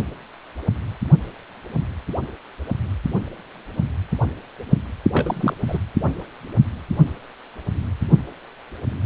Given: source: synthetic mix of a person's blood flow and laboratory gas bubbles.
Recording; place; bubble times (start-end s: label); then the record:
Doppler ultrasound of blood flow; precordium
5.12-5.54 s: bubbles
5.67-5.79 s: bubbles
6.00-6.12 s: bubbles
From the record:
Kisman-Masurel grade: 212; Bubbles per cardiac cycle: several, 3 to 8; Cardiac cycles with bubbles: 1 to 10%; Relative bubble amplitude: moderate (0.250 to 0.450); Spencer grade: 1 (occasional bubble signal discernible with the cardiac motion signal, with majority of cardiac periods free of bubbles); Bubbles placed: only in the low amplitude regions of the cardiac cycle